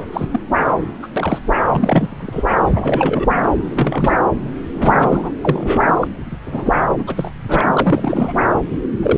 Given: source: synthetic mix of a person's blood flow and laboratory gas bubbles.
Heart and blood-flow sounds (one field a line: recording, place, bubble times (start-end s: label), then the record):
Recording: Doppler ultrasound of blood flow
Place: subclavian vein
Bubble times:
0.00-0.06 s: bubbles
0.12-0.28 s: bubbles
0.32-0.39 s: bubbles
1.02-1.08 s: bubbles
1.16-1.39 s: bubbles
1.72-2.44 s: bubbles
2.73-3.26 s: bubbles
3.69-4.18 s: bubbles
4.74-5.31 s: bubbles
5.42-5.92 s: bubbles
6.00-6.08 s: bubbles
6.46-6.71 s: bubbles
6.98-7.04 s: bubbles
7.07-7.30 s: bubbles
7.48-7.71 s: bubbles
7.74-8.33 s: bubbles
9.02-9.18 s: bubbles
From the record:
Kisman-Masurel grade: 242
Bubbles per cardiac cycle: several, 3 to 8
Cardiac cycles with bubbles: 100%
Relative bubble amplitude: moderate (0.250 to 0.450)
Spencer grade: 3 (all of the cardiac periods contain showers or single bubble signals, but not dominating or overriding the cardiac motion signals)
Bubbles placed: anywhere in the cardiac cycle